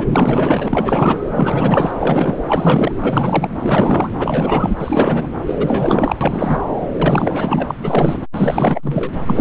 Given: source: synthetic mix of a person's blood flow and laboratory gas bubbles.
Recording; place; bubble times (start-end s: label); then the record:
Doppler ultrasound of blood flow; subclavian vein
0.00-0.07 s: bubbles
0.10-1.18 s: bubbles
1.34-1.92 s: bubbles
2.00-2.35 s: bubbles
2.48-2.92 s: bubbles
3.00-3.50 s: bubbles
3.58-4.09 s: bubbles
4.18-4.77 s: bubbles
4.80-5.31 s: bubbles
5.46-6.16 s: bubbles
6.21-6.60 s: bubbles
6.92-7.74 s: bubbles
7.83-8.19 s: bubbles
8.35-9.13 s: bubbles
9.27-9.41 s: bubbles
From the record:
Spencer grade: 4 (maximum detectable bubble signal sounding continuously throughout systole and diastole of every cardiac period, and overriding the amplitude of the normal cardiac signals); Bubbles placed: anywhere in the cardiac cycle